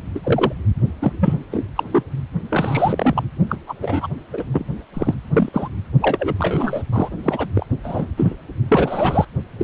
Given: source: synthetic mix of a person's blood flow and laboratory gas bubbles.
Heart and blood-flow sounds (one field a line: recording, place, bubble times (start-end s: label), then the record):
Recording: Doppler ultrasound of blood flow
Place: precordium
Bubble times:
0.14-0.20 s: bubbles
0.23-0.53 s: bubbles
1.01-1.12 s: bubbles
1.20-1.34 s: bubbles
1.51-1.64 s: bubbles
1.75-1.83 s: bubbles
1.92-2.04 s: bubbles
2.51-3.23 s: bubbles
3.49-3.56 s: bubbles
3.67-3.74 s: bubbles
3.82-4.07 s: bubbles
4.33-4.44 s: bubbles
4.52-4.64 s: bubbles
4.93-5.14 s: bubbles
5.33-5.49 s: bubbles
5.53-5.68 s: bubbles
6.00-6.34 s: bubbles
6.38-6.83 s: bubbles
6.92-7.09 s: bubbles
7.23-7.46 s: bubbles
7.55-7.66 s: bubbles
7.83-8.07 s: bubbles
8.17-8.36 s: bubbles
8.68-9.25 s: bubbles
9.58-9.63 s: bubbles
From the record:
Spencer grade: 3 (all of the cardiac periods contain showers or single bubble signals, but not dominating or overriding the cardiac motion signals)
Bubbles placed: only in the low amplitude regions of the cardiac cycle